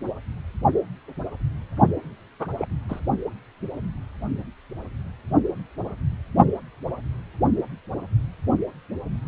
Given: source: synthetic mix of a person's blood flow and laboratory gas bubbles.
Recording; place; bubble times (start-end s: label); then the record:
Doppler ultrasound of blood flow; precordium
2.40-2.48 s: bubbles
2.58-2.66 s: bubbles
2.89-3.00 s: bubbles
From the record:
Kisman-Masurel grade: 211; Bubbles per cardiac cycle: several, 3 to 8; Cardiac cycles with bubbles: 1 to 10%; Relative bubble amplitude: barely perceptible (0.100 to 0.250); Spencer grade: 1 (occasional bubble signal discernible with the cardiac motion signal, with majority of cardiac periods free of bubbles); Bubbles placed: only in the low amplitude regions of the cardiac cycle